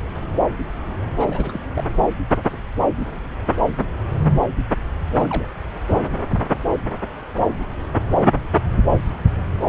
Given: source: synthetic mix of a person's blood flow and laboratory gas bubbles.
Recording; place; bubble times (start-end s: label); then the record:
Doppler ultrasound of blood flow; subclavian vein
1.17-1.60 s: bubbles
1.74-1.84 s: bubbles
5.10-5.47 s: bubbles
5.89-6.01 s: bubbles
From the record:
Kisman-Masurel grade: 211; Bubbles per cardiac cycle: several, 3 to 8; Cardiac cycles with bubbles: 1 to 10%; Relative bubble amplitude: barely perceptible (0.100 to 0.250); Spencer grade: 1 (occasional bubble signal discernible with the cardiac motion signal, with majority of cardiac periods free of bubbles); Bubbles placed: anywhere in the cardiac cycle